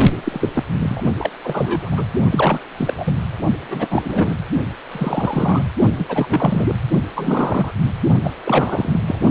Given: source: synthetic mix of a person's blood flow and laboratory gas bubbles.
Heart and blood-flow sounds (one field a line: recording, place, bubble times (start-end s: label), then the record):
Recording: Doppler ultrasound of blood flow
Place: precordium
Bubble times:
0.24-0.49 s: bubbles
0.54-0.64 s: bubbles
0.78-1.31 s: bubbles
1.42-2.04 s: bubbles
2.30-2.60 s: bubbles
2.78-2.94 s: bubbles
2.97-3.14 s: bubbles
3.70-3.88 s: bubbles
3.90-4.35 s: bubbles
4.92-5.63 s: bubbles
5.97-6.75 s: bubbles
7.15-7.71 s: bubbles
8.23-8.31 s: bubbles
8.45-8.99 s: bubbles
9.07-9.19 s: bubbles
From the record:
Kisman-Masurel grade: 342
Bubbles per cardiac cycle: rolling drumbeat, 9 or more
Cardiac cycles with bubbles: 100%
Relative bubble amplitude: moderate (0.250 to 0.450)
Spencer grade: 3 (all of the cardiac periods contain showers or single bubble signals, but not dominating or overriding the cardiac motion signals)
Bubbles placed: only in the low amplitude regions of the cardiac cycle